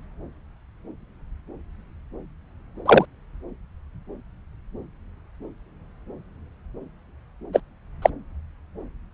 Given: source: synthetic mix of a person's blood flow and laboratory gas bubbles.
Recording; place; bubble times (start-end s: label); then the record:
Doppler ultrasound of blood flow; subclavian vein
2.86-3.05 s: bubbles
7.53-7.60 s: bubbles
8.02-8.10 s: bubbles
From the record:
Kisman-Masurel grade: 123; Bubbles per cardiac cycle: 1 to 2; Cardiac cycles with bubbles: 10 to 50%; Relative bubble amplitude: loud (0.450 to 0.775); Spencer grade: 2 (many but less than half of the cardiac periods contain bubble signals, singularly or in groups); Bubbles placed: anywhere in the cardiac cycle